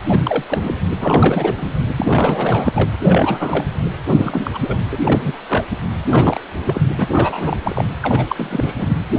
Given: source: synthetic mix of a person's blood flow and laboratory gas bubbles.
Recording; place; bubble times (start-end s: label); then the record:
Doppler ultrasound of blood flow; precordium
0.09-0.43 s: bubbles
0.49-0.76 s: bubbles
1.01-1.54 s: bubbles
1.56-1.74 s: bubbles
1.96-2.92 s: bubbles
3.01-3.65 s: bubbles
4.16-4.77 s: bubbles
4.92-4.98 s: bubbles
5.00-5.33 s: bubbles
5.49-5.65 s: bubbles
6.11-6.41 s: bubbles
6.65-6.82 s: bubbles
6.98-7.07 s: bubbles
7.13-7.57 s: bubbles
7.63-7.84 s: bubbles
8.02-8.26 s: bubbles
8.29-8.90 s: bubbles
From the record:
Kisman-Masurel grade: 332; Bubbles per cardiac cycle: rolling drumbeat, 9 or more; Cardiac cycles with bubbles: 50 to 99%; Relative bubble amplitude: moderate (0.250 to 0.450); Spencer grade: 3 (all of the cardiac periods contain showers or single bubble signals, but not dominating or overriding the cardiac motion signals); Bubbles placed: anywhere in the cardiac cycle